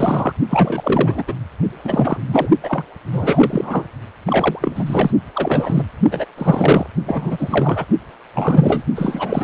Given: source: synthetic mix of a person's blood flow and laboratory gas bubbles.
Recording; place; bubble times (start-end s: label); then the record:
Doppler ultrasound of blood flow; precordium
0.00-0.33 s: bubbles
0.49-1.23 s: bubbles
1.27-1.33 s: bubbles
1.84-2.17 s: bubbles
2.27-2.49 s: bubbles
2.63-2.83 s: bubbles
3.12-3.88 s: bubbles
4.26-5.11 s: bubbles
5.34-5.87 s: bubbles
6.11-6.25 s: bubbles
6.38-6.87 s: bubbles
7.01-7.85 s: bubbles
8.34-8.84 s: bubbles
8.96-9.44 s: bubbles
From the record:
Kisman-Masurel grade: 333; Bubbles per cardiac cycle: rolling drumbeat, 9 or more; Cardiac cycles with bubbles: 50 to 99%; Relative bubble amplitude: loud (0.450 to 0.775); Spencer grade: 3 (all of the cardiac periods contain showers or single bubble signals, but not dominating or overriding the cardiac motion signals); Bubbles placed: only in the low amplitude regions of the cardiac cycle